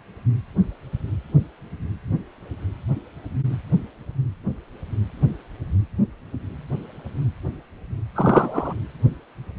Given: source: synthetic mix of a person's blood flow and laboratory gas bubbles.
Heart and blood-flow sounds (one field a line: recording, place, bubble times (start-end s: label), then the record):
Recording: Doppler ultrasound of blood flow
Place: precordium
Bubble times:
8.14-8.73 s: bubbles
From the record:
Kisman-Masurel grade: 213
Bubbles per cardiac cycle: several, 3 to 8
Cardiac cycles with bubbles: 1 to 10%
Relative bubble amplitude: loud (0.450 to 0.775)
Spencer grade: 1 (occasional bubble signal discernible with the cardiac motion signal, with majority of cardiac periods free of bubbles)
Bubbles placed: anywhere in the cardiac cycle